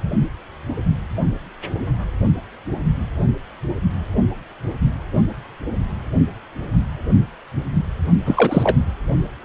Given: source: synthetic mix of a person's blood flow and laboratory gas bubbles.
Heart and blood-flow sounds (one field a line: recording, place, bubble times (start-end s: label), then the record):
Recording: Doppler ultrasound of blood flow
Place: precordium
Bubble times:
8.25-8.77 s: bubbles
From the record:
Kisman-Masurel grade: 213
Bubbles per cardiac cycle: several, 3 to 8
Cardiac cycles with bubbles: 1 to 10%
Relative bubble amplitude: loud (0.450 to 0.775)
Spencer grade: 1 (occasional bubble signal discernible with the cardiac motion signal, with majority of cardiac periods free of bubbles)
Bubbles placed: only in the low amplitude regions of the cardiac cycle